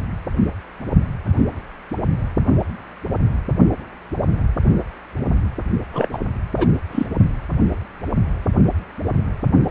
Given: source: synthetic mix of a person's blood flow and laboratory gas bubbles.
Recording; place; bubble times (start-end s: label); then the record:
Doppler ultrasound of blood flow; precordium
5.93-6.09 s: bubbles
6.12-6.19 s: bubbles
6.57-6.68 s: bubbles
6.92-7.07 s: bubbles
From the record:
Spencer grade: 1 (occasional bubble signal discernible with the cardiac motion signal, with majority of cardiac periods free of bubbles); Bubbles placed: only in the low amplitude regions of the cardiac cycle